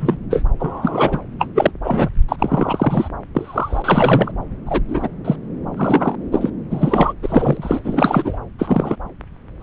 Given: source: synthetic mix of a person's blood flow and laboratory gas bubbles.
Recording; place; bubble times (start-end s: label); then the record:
Doppler ultrasound of blood flow; subclavian vein
0.00-0.16 s: bubbles
0.30-0.42 s: bubbles
0.59-1.21 s: bubbles
1.39-1.47 s: bubbles
1.55-1.71 s: bubbles
1.84-2.09 s: bubbles
2.28-2.36 s: bubbles
2.38-3.09 s: bubbles
3.35-4.31 s: bubbles
4.66-4.80 s: bubbles
4.88-5.08 s: bubbles
5.25-5.36 s: bubbles
5.76-6.16 s: bubbles
6.32-6.50 s: bubbles
6.70-7.13 s: bubbles
7.22-7.80 s: bubbles
7.84-8.38 s: bubbles
8.58-8.96 s: bubbles
9.60-9.63 s: bubbles
From the record:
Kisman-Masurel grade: 243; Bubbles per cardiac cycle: several, 3 to 8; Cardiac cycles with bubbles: 100%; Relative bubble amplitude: loud (0.450 to 0.775); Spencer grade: 3 (all of the cardiac periods contain showers or single bubble signals, but not dominating or overriding the cardiac motion signals); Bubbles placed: anywhere in the cardiac cycle